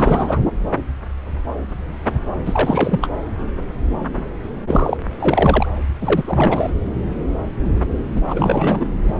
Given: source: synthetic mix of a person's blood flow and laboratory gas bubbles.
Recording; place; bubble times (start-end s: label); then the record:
Doppler ultrasound of blood flow; subclavian vein
0.00-0.41 s: bubbles
2.46-3.09 s: bubbles
4.67-4.97 s: bubbles
5.19-5.67 s: bubbles
6.01-6.71 s: bubbles
8.15-8.22 s: bubbles
8.25-8.86 s: bubbles
9.03-9.14 s: bubbles
From the record:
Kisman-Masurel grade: 333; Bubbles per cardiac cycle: rolling drumbeat, 9 or more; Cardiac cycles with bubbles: 50 to 99%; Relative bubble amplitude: loud (0.450 to 0.775); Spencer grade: 3 (all of the cardiac periods contain showers or single bubble signals, but not dominating or overriding the cardiac motion signals); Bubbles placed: anywhere in the cardiac cycle